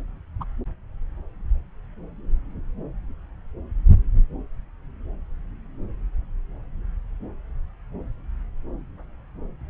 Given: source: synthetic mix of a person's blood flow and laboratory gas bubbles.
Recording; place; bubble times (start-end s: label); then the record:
Doppler ultrasound of blood flow; subclavian vein
0.40-0.44 s: bubbles
From the record:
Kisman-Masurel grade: 112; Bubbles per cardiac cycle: 1 to 2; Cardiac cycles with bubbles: 1 to 10%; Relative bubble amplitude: moderate (0.250 to 0.450); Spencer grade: 1 (occasional bubble signal discernible with the cardiac motion signal, with majority of cardiac periods free of bubbles); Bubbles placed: anywhere in the cardiac cycle